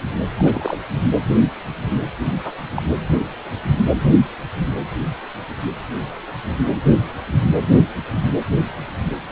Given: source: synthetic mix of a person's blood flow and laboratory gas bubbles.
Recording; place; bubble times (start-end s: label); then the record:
Doppler ultrasound of blood flow; precordium
0.36-0.78 s: bubbles
2.23-2.54 s: bubbles
2.75-2.82 s: bubbles
From the record:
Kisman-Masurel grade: 222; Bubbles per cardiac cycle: several, 3 to 8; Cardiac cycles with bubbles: 10 to 50%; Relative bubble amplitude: moderate (0.250 to 0.450); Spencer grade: 2 (many but less than half of the cardiac periods contain bubble signals, singularly or in groups); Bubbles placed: anywhere in the cardiac cycle